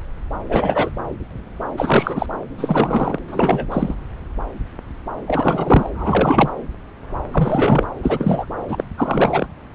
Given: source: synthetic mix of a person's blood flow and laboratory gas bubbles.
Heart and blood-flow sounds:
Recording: Doppler ultrasound of blood flow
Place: subclavian vein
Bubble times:
0.49-0.91 s: bubbles
1.77-2.26 s: bubbles
2.58-3.19 s: bubbles
3.27-3.65 s: bubbles
3.71-3.94 s: bubbles
5.27-5.90 s: bubbles
5.95-6.48 s: bubbles
7.33-7.87 s: bubbles
8.03-8.46 s: bubbles
8.68-8.84 s: bubbles
8.97-9.47 s: bubbles
From the record:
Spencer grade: 3 (all of the cardiac periods contain showers or single bubble signals, but not dominating or overriding the cardiac motion signals)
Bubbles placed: anywhere in the cardiac cycle

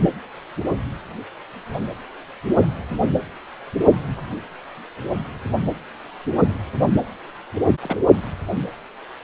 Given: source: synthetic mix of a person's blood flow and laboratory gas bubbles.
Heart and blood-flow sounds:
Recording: Doppler ultrasound of blood flow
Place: precordium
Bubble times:
7.81-7.97 s: bubbles
From the record:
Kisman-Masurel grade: 111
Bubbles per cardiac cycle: 1 to 2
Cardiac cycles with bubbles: 1 to 10%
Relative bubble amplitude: barely perceptible (0.100 to 0.250)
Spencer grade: 1 (occasional bubble signal discernible with the cardiac motion signal, with majority of cardiac periods free of bubbles)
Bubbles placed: anywhere in the cardiac cycle

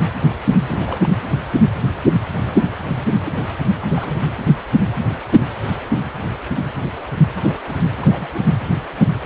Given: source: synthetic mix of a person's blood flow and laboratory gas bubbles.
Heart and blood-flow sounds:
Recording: Doppler ultrasound of blood flow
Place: precordium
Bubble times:
0.67-1.12 s: bubbles
3.14-3.33 s: bubbles
3.40-3.44 s: bubbles
3.81-3.87 s: bubbles
3.93-4.19 s: bubbles
7.36-7.62 s: bubbles
7.68-7.75 s: bubbles
8.01-8.28 s: bubbles
8.33-8.41 s: bubbles
From the record:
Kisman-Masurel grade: 221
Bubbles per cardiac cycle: several, 3 to 8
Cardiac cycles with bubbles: 10 to 50%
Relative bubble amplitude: barely perceptible (0.100 to 0.250)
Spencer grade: 2 (many but less than half of the cardiac periods contain bubble signals, singularly or in groups)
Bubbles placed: anywhere in the cardiac cycle

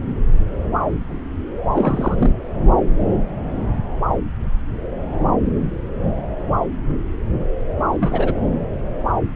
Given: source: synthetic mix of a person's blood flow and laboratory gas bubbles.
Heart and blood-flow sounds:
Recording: Doppler ultrasound of blood flow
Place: subclavian vein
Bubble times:
1.62-2.30 s: bubbles
7.98-8.34 s: bubbles
From the record:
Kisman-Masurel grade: 222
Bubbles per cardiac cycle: several, 3 to 8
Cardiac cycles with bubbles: 10 to 50%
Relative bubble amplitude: moderate (0.250 to 0.450)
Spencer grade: 2 (many but less than half of the cardiac periods contain bubble signals, singularly or in groups)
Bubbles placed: anywhere in the cardiac cycle

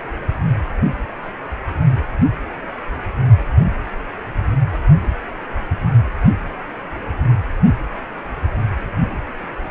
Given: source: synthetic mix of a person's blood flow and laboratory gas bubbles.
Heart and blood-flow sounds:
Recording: Doppler ultrasound of blood flow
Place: precordium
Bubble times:
no bubbles
From the record:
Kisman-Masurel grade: 000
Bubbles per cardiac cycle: 0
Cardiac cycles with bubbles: 0%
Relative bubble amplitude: no bubbles discernible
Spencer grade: 0 (complete lack of bubble signals)

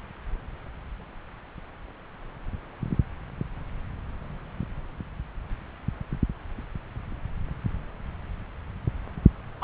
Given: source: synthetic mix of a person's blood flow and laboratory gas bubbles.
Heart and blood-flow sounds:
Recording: Doppler ultrasound of blood flow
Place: subclavian vein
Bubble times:
9.61-9.64 s: bubbles
From the record:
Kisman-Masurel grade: 213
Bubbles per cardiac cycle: several, 3 to 8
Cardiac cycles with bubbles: 1 to 10%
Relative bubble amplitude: loud (0.450 to 0.775)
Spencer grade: 1 (occasional bubble signal discernible with the cardiac motion signal, with majority of cardiac periods free of bubbles)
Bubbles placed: anywhere in the cardiac cycle

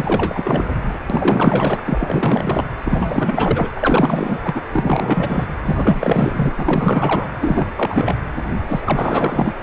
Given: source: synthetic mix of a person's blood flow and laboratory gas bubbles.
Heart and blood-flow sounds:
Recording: Doppler ultrasound of blood flow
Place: precordium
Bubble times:
0.00-0.64 s: bubbles
0.85-1.00 s: bubbles
1.09-1.82 s: bubbles
1.84-2.65 s: bubbles
2.85-3.69 s: bubbles
3.76-4.39 s: bubbles
4.44-4.62 s: bubbles
4.72-5.46 s: bubbles
5.66-6.52 s: bubbles
6.58-7.31 s: bubbles
7.41-7.68 s: bubbles
7.75-8.16 s: bubbles
8.67-8.81 s: bubbles
8.85-9.53 s: bubbles
From the record:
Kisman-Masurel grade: 444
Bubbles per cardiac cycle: continuous sound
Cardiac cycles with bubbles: 100%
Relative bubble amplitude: maximal (0.775 to 0.999)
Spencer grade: 4 (maximum detectable bubble signal sounding continuously throughout systole and diastole of every cardiac period, and overriding the amplitude of the normal cardiac signals)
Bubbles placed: anywhere in the cardiac cycle

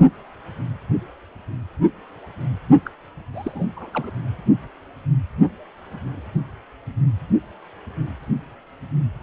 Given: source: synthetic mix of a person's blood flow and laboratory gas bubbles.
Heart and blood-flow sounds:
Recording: Doppler ultrasound of blood flow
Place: precordium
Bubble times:
2.85-2.90 s: bubbles
3.33-3.66 s: bubbles
3.76-4.10 s: bubbles
From the record:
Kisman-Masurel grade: 221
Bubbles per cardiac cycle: several, 3 to 8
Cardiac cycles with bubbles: 10 to 50%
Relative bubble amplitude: barely perceptible (0.100 to 0.250)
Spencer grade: 2 (many but less than half of the cardiac periods contain bubble signals, singularly or in groups)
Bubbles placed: only in the low amplitude regions of the cardiac cycle

